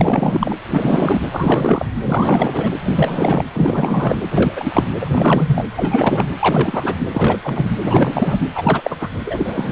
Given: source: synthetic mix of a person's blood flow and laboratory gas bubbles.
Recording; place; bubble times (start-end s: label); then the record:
Doppler ultrasound of blood flow; precordium
0.00-0.55 s: bubbles
0.70-1.20 s: bubbles
1.31-1.85 s: bubbles
2.03-2.71 s: bubbles
2.83-3.46 s: bubbles
3.54-4.18 s: bubbles
4.31-4.53 s: bubbles
4.56-4.88 s: bubbles
5.00-5.09 s: bubbles
5.12-5.67 s: bubbles
5.76-6.33 s: bubbles
6.39-6.95 s: bubbles
7.12-7.42 s: bubbles
7.44-7.70 s: bubbles
7.83-8.36 s: bubbles
8.54-8.96 s: bubbles
9.00-9.09 s: bubbles
9.26-9.72 s: bubbles
From the record:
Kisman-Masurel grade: 343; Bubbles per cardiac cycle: rolling drumbeat, 9 or more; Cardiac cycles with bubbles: 100%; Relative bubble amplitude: loud (0.450 to 0.775); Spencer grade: 3 (all of the cardiac periods contain showers or single bubble signals, but not dominating or overriding the cardiac motion signals); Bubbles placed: anywhere in the cardiac cycle